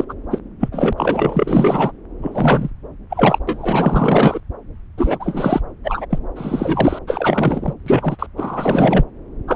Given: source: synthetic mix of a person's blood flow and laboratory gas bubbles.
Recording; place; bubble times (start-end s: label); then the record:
Doppler ultrasound of blood flow; subclavian vein
0.00-0.04 s: bubbles
0.09-0.14 s: bubbles
0.31-0.40 s: bubbles
0.59-0.68 s: bubbles
0.71-0.93 s: bubbles
0.97-1.92 s: bubbles
2.22-2.70 s: bubbles
3.10-3.39 s: bubbles
3.48-4.40 s: bubbles
4.97-5.60 s: bubbles
5.83-6.06 s: bubbles
6.09-6.18 s: bubbles
6.35-6.99 s: bubbles
7.07-7.73 s: bubbles
7.86-8.27 s: bubbles
8.37-9.04 s: bubbles
9.48-9.56 s: bubbles
From the record:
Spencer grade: 4 (maximum detectable bubble signal sounding continuously throughout systole and diastole of every cardiac period, and overriding the amplitude of the normal cardiac signals); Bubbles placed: anywhere in the cardiac cycle